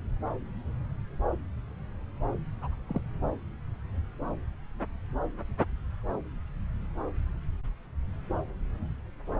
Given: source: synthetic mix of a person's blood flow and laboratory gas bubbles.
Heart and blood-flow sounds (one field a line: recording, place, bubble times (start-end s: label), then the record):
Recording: Doppler ultrasound of blood flow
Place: subclavian vein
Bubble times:
2.58-2.67 s: bubbles
2.71-2.75 s: bubbles
2.89-3.00 s: bubbles
From the record:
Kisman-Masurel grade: 111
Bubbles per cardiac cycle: 1 to 2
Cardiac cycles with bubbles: 1 to 10%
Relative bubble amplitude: barely perceptible (0.100 to 0.250)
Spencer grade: 1 (occasional bubble signal discernible with the cardiac motion signal, with majority of cardiac periods free of bubbles)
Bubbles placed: anywhere in the cardiac cycle